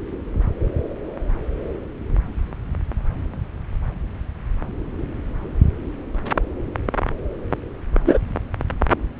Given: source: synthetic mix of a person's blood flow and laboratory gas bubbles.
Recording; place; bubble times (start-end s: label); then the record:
Doppler ultrasound of blood flow; subclavian vein
8.05-8.19 s: bubbles
From the record:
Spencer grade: 1 (occasional bubble signal discernible with the cardiac motion signal, with majority of cardiac periods free of bubbles); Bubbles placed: anywhere in the cardiac cycle